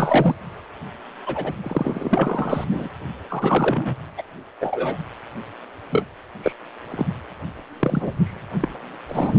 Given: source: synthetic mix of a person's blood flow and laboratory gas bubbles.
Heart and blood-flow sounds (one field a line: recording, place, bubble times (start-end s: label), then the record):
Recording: Doppler ultrasound of blood flow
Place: precordium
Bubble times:
0.00-0.35 s: bubbles
1.26-1.53 s: bubbles
1.63-2.65 s: bubbles
2.71-2.88 s: bubbles
3.28-3.95 s: bubbles
4.18-4.22 s: bubbles
4.60-4.97 s: bubbles
5.91-6.06 s: bubbles
6.43-6.53 s: bubbles
6.91-7.06 s: bubbles
7.79-8.13 s: bubbles
8.24-8.45 s: bubbles
8.62-8.68 s: bubbles
9.08-9.39 s: bubbles
From the record:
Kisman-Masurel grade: 242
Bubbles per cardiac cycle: several, 3 to 8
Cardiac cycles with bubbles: 100%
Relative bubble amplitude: moderate (0.250 to 0.450)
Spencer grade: 3 (all of the cardiac periods contain showers or single bubble signals, but not dominating or overriding the cardiac motion signals)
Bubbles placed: anywhere in the cardiac cycle